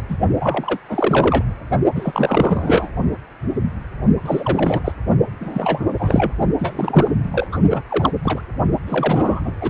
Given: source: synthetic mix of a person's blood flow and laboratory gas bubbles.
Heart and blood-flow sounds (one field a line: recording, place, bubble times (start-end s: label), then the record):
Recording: Doppler ultrasound of blood flow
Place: precordium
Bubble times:
0.08-0.18 s: bubbles
0.41-0.77 s: bubbles
0.89-1.42 s: bubbles
1.95-2.89 s: bubbles
4.19-4.81 s: bubbles
4.84-4.92 s: bubbles
5.40-5.86 s: bubbles
5.98-6.32 s: bubbles
6.59-7.11 s: bubbles
7.23-7.47 s: bubbles
7.51-7.59 s: bubbles
7.69-7.81 s: bubbles
7.89-8.12 s: bubbles
8.22-8.41 s: bubbles
8.87-9.52 s: bubbles
9.61-9.70 s: bubbles
From the record:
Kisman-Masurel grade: 332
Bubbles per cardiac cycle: rolling drumbeat, 9 or more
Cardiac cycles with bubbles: 50 to 99%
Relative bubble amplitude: moderate (0.250 to 0.450)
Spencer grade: 3 (all of the cardiac periods contain showers or single bubble signals, but not dominating or overriding the cardiac motion signals)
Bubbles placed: only in the low amplitude regions of the cardiac cycle